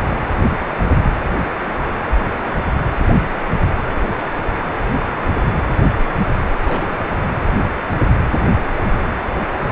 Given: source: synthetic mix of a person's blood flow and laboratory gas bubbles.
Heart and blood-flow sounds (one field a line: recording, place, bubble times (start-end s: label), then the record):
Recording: Doppler ultrasound of blood flow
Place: precordium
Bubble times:
6.62-7.10 s: bubbles
From the record:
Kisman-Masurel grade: 211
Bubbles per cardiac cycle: several, 3 to 8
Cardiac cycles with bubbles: 1 to 10%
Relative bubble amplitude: barely perceptible (0.100 to 0.250)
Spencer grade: 1 (occasional bubble signal discernible with the cardiac motion signal, with majority of cardiac periods free of bubbles)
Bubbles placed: anywhere in the cardiac cycle